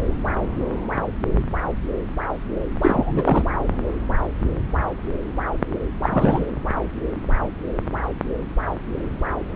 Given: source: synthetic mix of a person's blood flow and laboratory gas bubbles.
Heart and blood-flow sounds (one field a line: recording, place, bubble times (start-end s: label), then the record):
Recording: Doppler ultrasound of blood flow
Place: subclavian vein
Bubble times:
2.81-3.43 s: bubbles
6.03-6.50 s: bubbles
From the record:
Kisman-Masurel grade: 223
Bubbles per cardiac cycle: several, 3 to 8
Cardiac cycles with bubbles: 10 to 50%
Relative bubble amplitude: loud (0.450 to 0.775)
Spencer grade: 2 (many but less than half of the cardiac periods contain bubble signals, singularly or in groups)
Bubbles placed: anywhere in the cardiac cycle